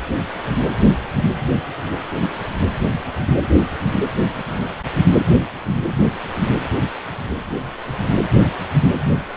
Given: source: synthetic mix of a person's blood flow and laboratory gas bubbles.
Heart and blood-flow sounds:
Doppler ultrasound of blood flow; precordium
3.28-3.38 s: bubbles
From the record:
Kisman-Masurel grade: 112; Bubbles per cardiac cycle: 1 to 2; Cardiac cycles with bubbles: 1 to 10%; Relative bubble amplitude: moderate (0.250 to 0.450); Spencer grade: 1 (occasional bubble signal discernible with the cardiac motion signal, with majority of cardiac periods free of bubbles); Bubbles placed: anywhere in the cardiac cycle

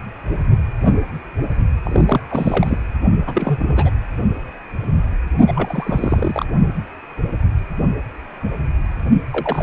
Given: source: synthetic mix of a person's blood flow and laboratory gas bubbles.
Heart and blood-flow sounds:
Doppler ultrasound of blood flow; precordium
1.83-2.22 s: bubbles
2.29-2.77 s: bubbles
3.26-3.90 s: bubbles
5.47-6.46 s: bubbles
9.31-9.63 s: bubbles
From the record:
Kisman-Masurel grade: 232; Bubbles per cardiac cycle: several, 3 to 8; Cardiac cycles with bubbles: 50 to 99%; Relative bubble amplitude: moderate (0.250 to 0.450); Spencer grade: 3 (all of the cardiac periods contain showers or single bubble signals, but not dominating or overriding the cardiac motion signals); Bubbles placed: only in the low amplitude regions of the cardiac cycle

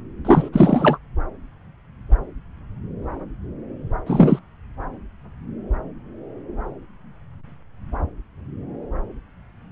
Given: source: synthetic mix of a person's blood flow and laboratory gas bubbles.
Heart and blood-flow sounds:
Doppler ultrasound of blood flow; subclavian vein
0.25-0.49 s: bubbles
0.53-0.98 s: bubbles
4.06-4.39 s: bubbles
From the record:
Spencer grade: 2 (many but less than half of the cardiac periods contain bubble signals, singularly or in groups); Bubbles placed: anywhere in the cardiac cycle

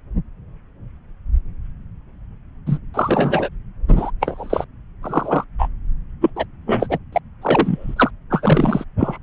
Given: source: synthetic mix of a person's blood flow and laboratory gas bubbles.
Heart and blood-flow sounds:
Doppler ultrasound of blood flow; subclavian vein
2.67-2.78 s: bubbles
2.94-3.49 s: bubbles
3.88-4.11 s: bubbles
4.21-4.65 s: bubbles
5.03-5.45 s: bubbles
5.59-5.68 s: bubbles
6.21-6.30 s: bubbles
6.36-6.45 s: bubbles
6.66-6.98 s: bubbles
7.12-7.19 s: bubbles
7.41-8.11 s: bubbles
8.30-8.84 s: bubbles
8.99-9.17 s: bubbles
From the record:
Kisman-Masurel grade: 233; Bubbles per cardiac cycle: several, 3 to 8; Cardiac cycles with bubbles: 50 to 99%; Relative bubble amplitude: loud (0.450 to 0.775); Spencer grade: 3 (all of the cardiac periods contain showers or single bubble signals, but not dominating or overriding the cardiac motion signals); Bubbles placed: anywhere in the cardiac cycle

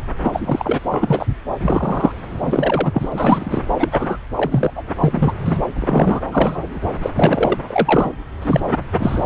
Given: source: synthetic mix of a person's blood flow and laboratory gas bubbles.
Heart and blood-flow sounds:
Doppler ultrasound of blood flow; subclavian vein
0.22-0.80 s: bubbles
0.90-1.26 s: bubbles
1.59-2.12 s: bubbles
2.31-3.09 s: bubbles
3.12-3.63 s: bubbles
3.79-3.89 s: bubbles
3.92-4.17 s: bubbles
4.37-4.71 s: bubbles
4.75-4.83 s: bubbles
5.00-5.33 s: bubbles
5.45-5.57 s: bubbles
5.75-6.21 s: bubbles
6.31-6.80 s: bubbles
7.03-7.10 s: bubbles
7.16-7.58 s: bubbles
7.67-8.10 s: bubbles
8.42-8.61 s: bubbles
8.99-9.24 s: bubbles
From the record:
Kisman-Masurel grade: 243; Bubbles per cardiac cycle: several, 3 to 8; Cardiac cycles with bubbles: 100%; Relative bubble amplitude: loud (0.450 to 0.775); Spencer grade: 3 (all of the cardiac periods contain showers or single bubble signals, but not dominating or overriding the cardiac motion signals); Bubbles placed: anywhere in the cardiac cycle

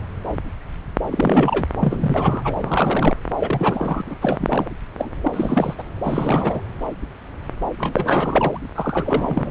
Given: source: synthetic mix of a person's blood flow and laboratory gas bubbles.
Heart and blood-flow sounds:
Doppler ultrasound of blood flow; subclavian vein
1.11-1.65 s: bubbles
1.79-2.54 s: bubbles
2.62-3.15 s: bubbles
3.36-4.02 s: bubbles
4.07-4.15 s: bubbles
4.22-4.70 s: bubbles
4.97-5.11 s: bubbles
5.23-5.74 s: bubbles
5.79-5.83 s: bubbles
6.04-6.62 s: bubbles
7.78-8.60 s: bubbles
8.74-9.51 s: bubbles
From the record:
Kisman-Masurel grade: 332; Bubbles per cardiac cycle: rolling drumbeat, 9 or more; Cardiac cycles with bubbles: 50 to 99%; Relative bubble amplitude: moderate (0.250 to 0.450); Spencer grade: 3 (all of the cardiac periods contain showers or single bubble signals, but not dominating or overriding the cardiac motion signals); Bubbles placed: anywhere in the cardiac cycle

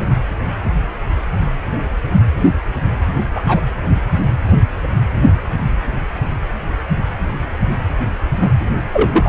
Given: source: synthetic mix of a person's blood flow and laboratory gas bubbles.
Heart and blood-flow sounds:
Doppler ultrasound of blood flow; precordium
3.35-3.61 s: bubbles
8.40-8.49 s: bubbles
8.93-9.29 s: bubbles
From the record:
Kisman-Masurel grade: 123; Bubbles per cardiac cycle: 1 to 2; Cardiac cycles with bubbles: 10 to 50%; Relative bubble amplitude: loud (0.450 to 0.775); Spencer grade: 2 (many but less than half of the cardiac periods contain bubble signals, singularly or in groups); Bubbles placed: anywhere in the cardiac cycle

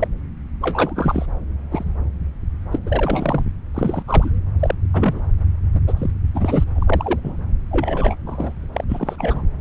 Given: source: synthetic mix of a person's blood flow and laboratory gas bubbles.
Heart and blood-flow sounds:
Doppler ultrasound of blood flow; subclavian vein
0.00-0.08 s: bubbles
0.61-1.26 s: bubbles
1.71-1.84 s: bubbles
2.72-2.77 s: bubbles
2.86-3.42 s: bubbles
3.74-4.02 s: bubbles
4.08-4.30 s: bubbles
4.59-4.75 s: bubbles
4.93-5.21 s: bubbles
5.75-5.80 s: bubbles
5.87-5.93 s: bubbles
5.96-6.10 s: bubbles
6.34-6.64 s: bubbles
6.75-7.20 s: bubbles
7.23-7.37 s: bubbles
7.71-8.16 s: bubbles
8.26-8.67 s: bubbles
8.73-8.84 s: bubbles
8.90-9.43 s: bubbles
From the record:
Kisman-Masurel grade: 242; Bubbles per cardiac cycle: several, 3 to 8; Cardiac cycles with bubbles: 100%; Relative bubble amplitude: moderate (0.250 to 0.450); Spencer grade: 3 (all of the cardiac periods contain showers or single bubble signals, but not dominating or overriding the cardiac motion signals); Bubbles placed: anywhere in the cardiac cycle

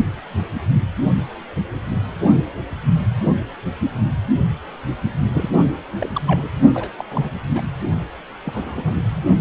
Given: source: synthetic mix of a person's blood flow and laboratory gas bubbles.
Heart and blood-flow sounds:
Doppler ultrasound of blood flow; precordium
5.33-5.49 s: bubbles
5.64-5.72 s: bubbles
6.00-6.08 s: bubbles
6.13-6.22 s: bubbles
6.27-6.49 s: bubbles
6.74-6.89 s: bubbles
6.97-7.05 s: bubbles
7.10-7.29 s: bubbles
7.55-7.61 s: bubbles
8.45-9.03 s: bubbles
From the record:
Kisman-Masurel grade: 232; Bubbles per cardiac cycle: several, 3 to 8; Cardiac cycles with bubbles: 50 to 99%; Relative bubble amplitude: moderate (0.250 to 0.450); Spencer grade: 3 (all of the cardiac periods contain showers or single bubble signals, but not dominating or overriding the cardiac motion signals); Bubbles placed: only in the low amplitude regions of the cardiac cycle

